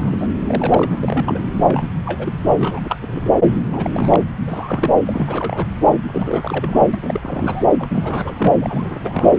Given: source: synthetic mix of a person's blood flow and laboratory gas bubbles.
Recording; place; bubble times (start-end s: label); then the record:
Doppler ultrasound of blood flow; subclavian vein
0.00-0.28 s: bubbles
0.47-1.43 s: bubbles
1.56-1.87 s: bubbles
2.04-2.33 s: bubbles
2.46-2.54 s: bubbles
2.58-2.80 s: bubbles
2.84-2.99 s: bubbles
3.01-3.30 s: bubbles
3.65-3.90 s: bubbles
3.94-4.23 s: bubbles
4.40-4.96 s: bubbles
5.07-5.67 s: bubbles
6.06-6.99 s: bubbles
7.02-7.65 s: bubbles
7.79-8.53 s: bubbles
8.61-9.36 s: bubbles
From the record:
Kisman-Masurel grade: 342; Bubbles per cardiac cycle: rolling drumbeat, 9 or more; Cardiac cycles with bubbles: 100%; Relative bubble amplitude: moderate (0.250 to 0.450); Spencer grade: 3 (all of the cardiac periods contain showers or single bubble signals, but not dominating or overriding the cardiac motion signals); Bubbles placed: anywhere in the cardiac cycle